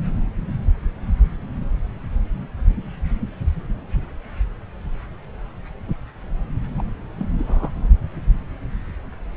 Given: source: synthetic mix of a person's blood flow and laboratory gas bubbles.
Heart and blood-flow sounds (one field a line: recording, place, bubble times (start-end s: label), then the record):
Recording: Doppler ultrasound of blood flow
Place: subclavian vein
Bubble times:
6.78-6.82 s: bubbles
7.17-7.27 s: bubbles
7.38-7.70 s: bubbles
From the record:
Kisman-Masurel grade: 211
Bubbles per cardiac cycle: several, 3 to 8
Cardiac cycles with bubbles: 1 to 10%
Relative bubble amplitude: barely perceptible (0.100 to 0.250)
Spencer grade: 1 (occasional bubble signal discernible with the cardiac motion signal, with majority of cardiac periods free of bubbles)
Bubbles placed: anywhere in the cardiac cycle